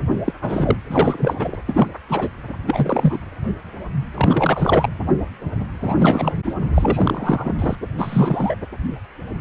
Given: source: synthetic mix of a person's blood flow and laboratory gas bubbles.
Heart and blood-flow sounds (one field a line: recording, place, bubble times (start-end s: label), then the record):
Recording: Doppler ultrasound of blood flow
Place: precordium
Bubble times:
0.25-0.33 s: bubbles
0.42-0.76 s: bubbles
0.88-1.57 s: bubbles
1.67-1.88 s: bubbles
2.08-2.29 s: bubbles
2.67-3.19 s: bubbles
4.14-4.89 s: bubbles
5.79-6.32 s: bubbles
6.46-6.56 s: bubbles
6.74-7.54 s: bubbles
7.58-7.75 s: bubbles
7.98-8.55 s: bubbles
From the record:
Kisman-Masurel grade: 333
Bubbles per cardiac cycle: rolling drumbeat, 9 or more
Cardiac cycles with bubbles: 50 to 99%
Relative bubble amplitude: loud (0.450 to 0.775)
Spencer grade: 3 (all of the cardiac periods contain showers or single bubble signals, but not dominating or overriding the cardiac motion signals)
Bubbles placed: anywhere in the cardiac cycle